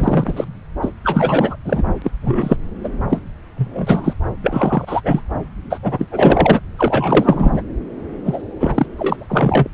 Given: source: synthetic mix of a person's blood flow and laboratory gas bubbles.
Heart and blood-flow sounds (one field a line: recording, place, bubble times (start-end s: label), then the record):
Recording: Doppler ultrasound of blood flow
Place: subclavian vein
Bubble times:
0.00-0.45 s: bubbles
0.81-0.92 s: bubbles
1.03-1.56 s: bubbles
1.65-1.82 s: bubbles
2.02-2.11 s: bubbles
2.24-2.56 s: bubbles
2.83-2.89 s: bubbles
3.09-3.24 s: bubbles
3.56-4.13 s: bubbles
4.43-5.01 s: bubbles
5.04-5.21 s: bubbles
5.70-5.79 s: bubbles
5.83-6.08 s: bubbles
6.11-6.60 s: bubbles
6.78-7.62 s: bubbles
8.24-8.42 s: bubbles
8.60-8.87 s: bubbles
8.97-9.68 s: bubbles
From the record:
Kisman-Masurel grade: 243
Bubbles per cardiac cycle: several, 3 to 8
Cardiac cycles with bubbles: 100%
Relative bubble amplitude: loud (0.450 to 0.775)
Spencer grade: 3 (all of the cardiac periods contain showers or single bubble signals, but not dominating or overriding the cardiac motion signals)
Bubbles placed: anywhere in the cardiac cycle